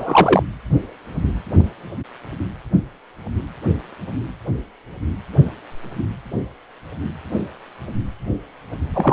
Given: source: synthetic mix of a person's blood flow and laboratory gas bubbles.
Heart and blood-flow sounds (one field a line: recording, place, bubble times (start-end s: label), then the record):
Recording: Doppler ultrasound of blood flow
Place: precordium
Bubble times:
0.00-0.42 s: bubbles
8.93-9.13 s: bubbles
From the record:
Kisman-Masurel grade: 223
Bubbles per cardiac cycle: several, 3 to 8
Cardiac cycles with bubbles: 10 to 50%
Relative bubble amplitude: loud (0.450 to 0.775)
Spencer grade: 2 (many but less than half of the cardiac periods contain bubble signals, singularly or in groups)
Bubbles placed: anywhere in the cardiac cycle